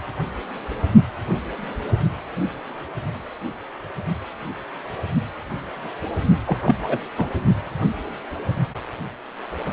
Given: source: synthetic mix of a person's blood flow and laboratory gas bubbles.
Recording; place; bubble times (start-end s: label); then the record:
Doppler ultrasound of blood flow; precordium
6.46-6.58 s: bubbles
6.65-6.76 s: bubbles
6.83-6.99 s: bubbles
7.17-7.33 s: bubbles
From the record:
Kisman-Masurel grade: 212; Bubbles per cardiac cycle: several, 3 to 8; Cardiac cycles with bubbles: 1 to 10%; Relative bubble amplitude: moderate (0.250 to 0.450); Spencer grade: 1 (occasional bubble signal discernible with the cardiac motion signal, with majority of cardiac periods free of bubbles); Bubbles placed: only in the low amplitude regions of the cardiac cycle